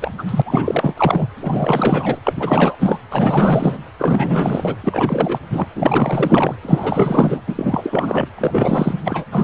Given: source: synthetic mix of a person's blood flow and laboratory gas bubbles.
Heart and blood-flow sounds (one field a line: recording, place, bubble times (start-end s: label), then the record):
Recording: Doppler ultrasound of blood flow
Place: precordium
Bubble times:
0.00-0.14 s: bubbles
0.18-0.23 s: bubbles
0.26-0.42 s: bubbles
0.46-0.94 s: bubbles
0.97-1.29 s: bubbles
1.41-2.20 s: bubbles
2.23-2.75 s: bubbles
2.79-2.98 s: bubbles
3.12-3.83 s: bubbles
3.98-4.76 s: bubbles
4.83-5.39 s: bubbles
5.49-5.67 s: bubbles
5.75-6.57 s: bubbles
6.62-7.41 s: bubbles
7.47-8.27 s: bubbles
8.38-8.94 s: bubbles
9.04-9.25 s: bubbles
9.32-9.44 s: bubbles
From the record:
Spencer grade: 4 (maximum detectable bubble signal sounding continuously throughout systole and diastole of every cardiac period, and overriding the amplitude of the normal cardiac signals)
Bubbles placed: anywhere in the cardiac cycle